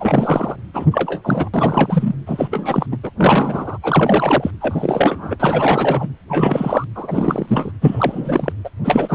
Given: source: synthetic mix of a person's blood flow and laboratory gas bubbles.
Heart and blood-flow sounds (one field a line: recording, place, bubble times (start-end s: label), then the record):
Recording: Doppler ultrasound of blood flow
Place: precordium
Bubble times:
0.00-0.56 s: bubbles
0.73-0.86 s: bubbles
0.91-1.49 s: bubbles
1.54-2.15 s: bubbles
2.26-2.48 s: bubbles
2.50-2.86 s: bubbles
2.92-2.97 s: bubbles
3.03-3.10 s: bubbles
3.18-3.77 s: bubbles
3.82-4.50 s: bubbles
4.61-5.36 s: bubbles
5.40-6.08 s: bubbles
6.29-6.85 s: bubbles
6.95-7.72 s: bubbles
7.81-8.52 s: bubbles
8.64-8.70 s: bubbles
8.84-9.15 s: bubbles
From the record:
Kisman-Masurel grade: 343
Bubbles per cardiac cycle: rolling drumbeat, 9 or more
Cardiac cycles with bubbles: 100%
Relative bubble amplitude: loud (0.450 to 0.775)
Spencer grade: 3 (all of the cardiac periods contain showers or single bubble signals, but not dominating or overriding the cardiac motion signals)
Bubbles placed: anywhere in the cardiac cycle